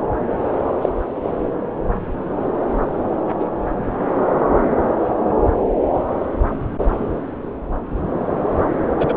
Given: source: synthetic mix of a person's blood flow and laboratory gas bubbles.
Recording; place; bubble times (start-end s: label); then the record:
Doppler ultrasound of blood flow; subclavian vein
0.81-0.89 s: bubbles
3.40-3.46 s: bubbles
8.98-9.14 s: bubbles
From the record:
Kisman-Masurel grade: 123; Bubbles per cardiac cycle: 1 to 2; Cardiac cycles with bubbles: 10 to 50%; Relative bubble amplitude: loud (0.450 to 0.775); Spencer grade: 2 (many but less than half of the cardiac periods contain bubble signals, singularly or in groups); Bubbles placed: anywhere in the cardiac cycle